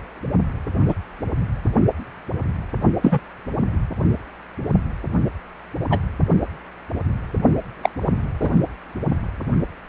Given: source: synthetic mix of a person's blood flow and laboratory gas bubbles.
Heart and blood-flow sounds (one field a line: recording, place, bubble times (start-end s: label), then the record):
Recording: Doppler ultrasound of blood flow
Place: precordium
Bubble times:
0.88-0.94 s: bubbles
3.02-3.19 s: bubbles
5.90-5.99 s: bubbles
7.83-7.89 s: bubbles
8.40-8.50 s: bubbles
From the record:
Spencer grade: 2 (many but less than half of the cardiac periods contain bubble signals, singularly or in groups)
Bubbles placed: only in the low amplitude regions of the cardiac cycle